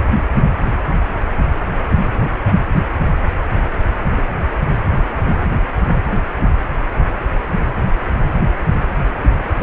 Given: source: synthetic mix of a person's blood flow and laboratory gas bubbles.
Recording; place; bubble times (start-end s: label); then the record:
Doppler ultrasound of blood flow; precordium
9.58-9.63 s: bubbles
From the record:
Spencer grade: 1 (occasional bubble signal discernible with the cardiac motion signal, with majority of cardiac periods free of bubbles); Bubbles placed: anywhere in the cardiac cycle